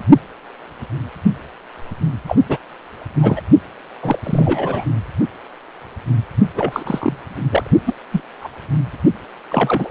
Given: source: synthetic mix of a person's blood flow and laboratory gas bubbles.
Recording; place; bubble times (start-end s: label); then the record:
Doppler ultrasound of blood flow; precordium
2.27-2.36 s: bubbles
2.49-2.57 s: bubbles
3.17-3.40 s: bubbles
4.03-4.19 s: bubbles
4.24-4.83 s: bubbles
6.54-7.19 s: bubbles
7.46-7.71 s: bubbles
7.86-7.93 s: bubbles
8.12-8.21 s: bubbles
8.42-8.49 s: bubbles
9.49-9.91 s: bubbles
From the record:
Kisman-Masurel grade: 233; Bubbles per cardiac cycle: several, 3 to 8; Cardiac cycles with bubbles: 50 to 99%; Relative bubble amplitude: loud (0.450 to 0.775); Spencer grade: 3 (all of the cardiac periods contain showers or single bubble signals, but not dominating or overriding the cardiac motion signals); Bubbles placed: only in the low amplitude regions of the cardiac cycle